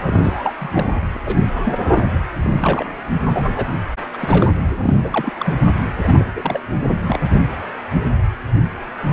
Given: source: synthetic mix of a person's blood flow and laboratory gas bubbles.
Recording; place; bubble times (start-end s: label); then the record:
Doppler ultrasound of blood flow; precordium
0.05-0.53 s: bubbles
0.58-1.05 s: bubbles
1.14-1.17 s: bubbles
1.25-1.42 s: bubbles
1.52-1.75 s: bubbles
1.78-2.23 s: bubbles
2.42-2.88 s: bubbles
3.29-3.67 s: bubbles
4.12-4.49 s: bubbles
4.83-4.95 s: bubbles
5.02-5.33 s: bubbles
5.40-5.55 s: bubbles
5.86-5.88 s: bubbles
6.00-6.25 s: bubbles
6.35-6.61 s: bubbles
7.06-7.19 s: bubbles
From the record:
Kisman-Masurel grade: 332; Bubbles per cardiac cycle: rolling drumbeat, 9 or more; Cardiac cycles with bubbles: 50 to 99%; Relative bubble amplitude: moderate (0.250 to 0.450); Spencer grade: 3 (all of the cardiac periods contain showers or single bubble signals, but not dominating or overriding the cardiac motion signals); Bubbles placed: anywhere in the cardiac cycle